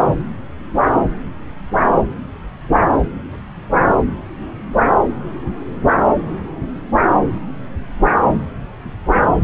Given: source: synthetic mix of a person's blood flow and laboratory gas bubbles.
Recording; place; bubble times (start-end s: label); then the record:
Doppler ultrasound of blood flow; subclavian vein
0.02-0.16 s: bubbles
From the record:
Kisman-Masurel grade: 111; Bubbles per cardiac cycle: 1 to 2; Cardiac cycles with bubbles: 1 to 10%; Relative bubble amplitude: barely perceptible (0.100 to 0.250); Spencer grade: 1 (occasional bubble signal discernible with the cardiac motion signal, with majority of cardiac periods free of bubbles); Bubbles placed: anywhere in the cardiac cycle